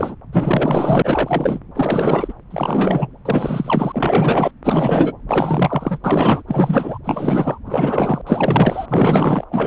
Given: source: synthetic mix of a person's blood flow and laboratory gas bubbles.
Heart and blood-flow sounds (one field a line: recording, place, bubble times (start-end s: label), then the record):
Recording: Doppler ultrasound of blood flow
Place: subclavian vein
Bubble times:
0.00-0.15 s: bubbles
0.32-1.59 s: bubbles
1.75-2.33 s: bubbles
2.50-3.08 s: bubbles
3.25-4.51 s: bubbles
4.63-5.12 s: bubbles
5.29-5.99 s: bubbles
6.04-6.42 s: bubbles
6.47-6.98 s: bubbles
7.04-7.58 s: bubbles
7.66-8.21 s: bubbles
8.27-9.45 s: bubbles
9.51-9.67 s: bubbles
From the record:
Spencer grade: 4 (maximum detectable bubble signal sounding continuously throughout systole and diastole of every cardiac period, and overriding the amplitude of the normal cardiac signals)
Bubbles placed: anywhere in the cardiac cycle